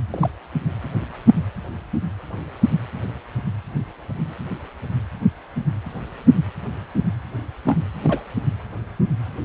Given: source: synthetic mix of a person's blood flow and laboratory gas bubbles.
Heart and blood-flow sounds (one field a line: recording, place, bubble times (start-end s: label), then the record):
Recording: Doppler ultrasound of blood flow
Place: precordium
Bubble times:
0.11-0.30 s: bubbles
7.65-7.79 s: bubbles
8.03-8.23 s: bubbles
From the record:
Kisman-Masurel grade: 122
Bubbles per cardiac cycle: 1 to 2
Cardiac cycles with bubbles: 10 to 50%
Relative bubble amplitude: moderate (0.250 to 0.450)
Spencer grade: 2 (many but less than half of the cardiac periods contain bubble signals, singularly or in groups)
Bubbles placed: anywhere in the cardiac cycle